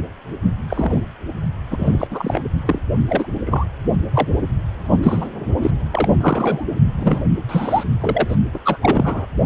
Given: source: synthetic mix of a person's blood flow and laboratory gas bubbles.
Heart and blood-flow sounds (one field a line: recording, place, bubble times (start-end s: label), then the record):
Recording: Doppler ultrasound of blood flow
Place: precordium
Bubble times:
0.69-1.02 s: bubbles
1.71-2.07 s: bubbles
2.10-2.42 s: bubbles
2.66-2.79 s: bubbles
3.08-3.26 s: bubbles
3.46-3.66 s: bubbles
4.13-4.28 s: bubbles
4.78-5.28 s: bubbles
5.62-5.71 s: bubbles
5.92-6.08 s: bubbles
6.21-6.65 s: bubbles
6.99-7.24 s: bubbles
7.49-7.83 s: bubbles
8.00-8.36 s: bubbles
8.53-8.58 s: bubbles
8.64-8.78 s: bubbles
8.81-9.25 s: bubbles
From the record:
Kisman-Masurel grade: 243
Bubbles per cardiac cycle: several, 3 to 8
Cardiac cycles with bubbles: 100%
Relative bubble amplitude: loud (0.450 to 0.775)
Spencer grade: 3 (all of the cardiac periods contain showers or single bubble signals, but not dominating or overriding the cardiac motion signals)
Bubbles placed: only in the low amplitude regions of the cardiac cycle